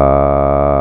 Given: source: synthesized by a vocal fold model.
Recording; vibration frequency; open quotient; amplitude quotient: sustained vowel; 70 Hz; 0.5; 1.4